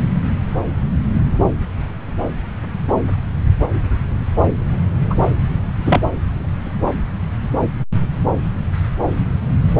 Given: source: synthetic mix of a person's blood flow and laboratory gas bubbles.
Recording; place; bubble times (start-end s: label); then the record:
Doppler ultrasound of blood flow; subclavian vein
5.10-5.15 s: bubbles
5.85-6.00 s: bubbles
From the record:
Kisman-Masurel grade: 213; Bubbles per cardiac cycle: several, 3 to 8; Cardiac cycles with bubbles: 1 to 10%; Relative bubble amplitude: loud (0.450 to 0.775); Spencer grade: 1 (occasional bubble signal discernible with the cardiac motion signal, with majority of cardiac periods free of bubbles); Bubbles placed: anywhere in the cardiac cycle